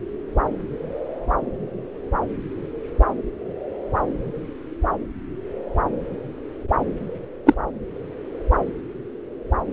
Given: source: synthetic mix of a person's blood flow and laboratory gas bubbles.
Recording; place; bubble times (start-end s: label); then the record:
Doppler ultrasound of blood flow; subclavian vein
7.46-7.54 s: bubbles
From the record:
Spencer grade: 1 (occasional bubble signal discernible with the cardiac motion signal, with majority of cardiac periods free of bubbles); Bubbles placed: anywhere in the cardiac cycle